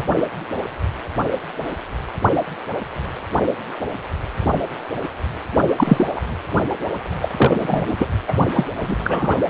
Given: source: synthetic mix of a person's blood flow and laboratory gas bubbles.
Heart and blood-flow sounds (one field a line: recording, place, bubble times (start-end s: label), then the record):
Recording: Doppler ultrasound of blood flow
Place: precordium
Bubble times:
0.00-0.04 s: bubbles
5.77-6.07 s: bubbles
6.15-6.21 s: bubbles
7.21-7.32 s: bubbles
7.38-7.94 s: bubbles
7.99-8.08 s: bubbles
8.27-8.32 s: bubbles
8.55-8.65 s: bubbles
8.80-8.96 s: bubbles
9.04-9.43 s: bubbles
From the record:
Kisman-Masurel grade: 233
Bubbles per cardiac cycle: several, 3 to 8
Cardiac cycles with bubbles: 50 to 99%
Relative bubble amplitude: loud (0.450 to 0.775)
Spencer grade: 3 (all of the cardiac periods contain showers or single bubble signals, but not dominating or overriding the cardiac motion signals)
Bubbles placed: only in the low amplitude regions of the cardiac cycle